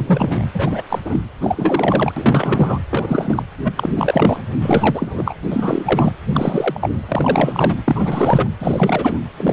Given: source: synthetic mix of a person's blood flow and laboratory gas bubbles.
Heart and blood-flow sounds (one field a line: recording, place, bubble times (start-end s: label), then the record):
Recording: Doppler ultrasound of blood flow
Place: precordium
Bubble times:
0.00-0.45 s: bubbles
0.54-0.83 s: bubbles
0.89-1.00 s: bubbles
1.05-1.20 s: bubbles
1.38-2.12 s: bubbles
2.16-2.79 s: bubbles
2.90-3.43 s: bubbles
3.64-3.73 s: bubbles
3.77-3.90 s: bubbles
3.95-4.41 s: bubbles
4.61-5.34 s: bubbles
5.50-6.12 s: bubbles
6.33-6.90 s: bubbles
7.08-7.75 s: bubbles
7.84-8.50 s: bubbles
8.59-9.20 s: bubbles
9.37-9.53 s: bubbles
From the record:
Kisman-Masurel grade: 343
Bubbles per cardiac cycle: rolling drumbeat, 9 or more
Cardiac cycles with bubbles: 100%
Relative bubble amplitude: loud (0.450 to 0.775)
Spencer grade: 3 (all of the cardiac periods contain showers or single bubble signals, but not dominating or overriding the cardiac motion signals)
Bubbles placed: anywhere in the cardiac cycle